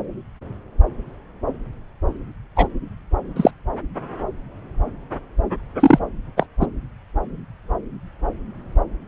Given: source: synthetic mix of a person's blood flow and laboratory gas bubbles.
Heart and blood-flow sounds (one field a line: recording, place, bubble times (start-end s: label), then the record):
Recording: Doppler ultrasound of blood flow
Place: subclavian vein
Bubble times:
2.56-2.68 s: bubbles
3.36-3.51 s: bubbles
5.79-5.99 s: bubbles
6.37-6.46 s: bubbles
6.61-6.67 s: bubbles
From the record:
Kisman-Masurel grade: 123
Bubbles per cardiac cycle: 1 to 2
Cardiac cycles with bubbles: 10 to 50%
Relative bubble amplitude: loud (0.450 to 0.775)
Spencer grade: 2 (many but less than half of the cardiac periods contain bubble signals, singularly or in groups)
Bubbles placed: anywhere in the cardiac cycle